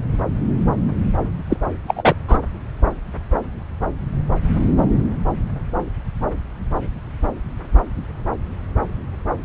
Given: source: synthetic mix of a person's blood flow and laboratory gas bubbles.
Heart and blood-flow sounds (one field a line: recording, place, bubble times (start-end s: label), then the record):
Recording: Doppler ultrasound of blood flow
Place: subclavian vein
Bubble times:
1.50-1.58 s: bubbles
1.88-2.15 s: bubbles
2.27-2.38 s: bubbles
From the record:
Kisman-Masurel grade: 223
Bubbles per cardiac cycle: several, 3 to 8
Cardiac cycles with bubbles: 10 to 50%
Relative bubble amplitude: loud (0.450 to 0.775)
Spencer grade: 2 (many but less than half of the cardiac periods contain bubble signals, singularly or in groups)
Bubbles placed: anywhere in the cardiac cycle